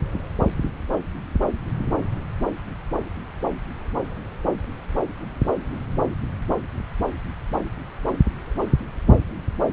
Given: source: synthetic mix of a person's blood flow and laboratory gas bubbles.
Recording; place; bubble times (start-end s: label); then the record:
Doppler ultrasound of blood flow; subclavian vein
no bubbles
From the record:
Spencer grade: 0 (complete lack of bubble signals)